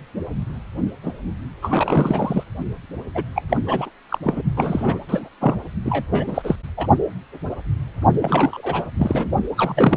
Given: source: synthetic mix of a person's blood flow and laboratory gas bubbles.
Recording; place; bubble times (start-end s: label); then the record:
Doppler ultrasound of blood flow; precordium
1.03-1.12 s: bubbles
1.61-2.44 s: bubbles
3.15-3.23 s: bubbles
3.36-3.43 s: bubbles
3.49-3.57 s: bubbles
3.66-3.90 s: bubbles
4.09-4.19 s: bubbles
4.24-4.42 s: bubbles
4.56-4.99 s: bubbles
5.08-5.29 s: bubbles
5.41-5.56 s: bubbles
5.85-6.06 s: bubbles
6.10-6.56 s: bubbles
6.77-6.87 s: bubbles
8.21-8.87 s: bubbles
8.97-9.30 s: bubbles
9.57-9.97 s: bubbles
From the record:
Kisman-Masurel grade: 332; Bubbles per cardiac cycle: rolling drumbeat, 9 or more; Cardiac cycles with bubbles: 50 to 99%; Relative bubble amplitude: moderate (0.250 to 0.450); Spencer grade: 3 (all of the cardiac periods contain showers or single bubble signals, but not dominating or overriding the cardiac motion signals); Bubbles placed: only in the low amplitude regions of the cardiac cycle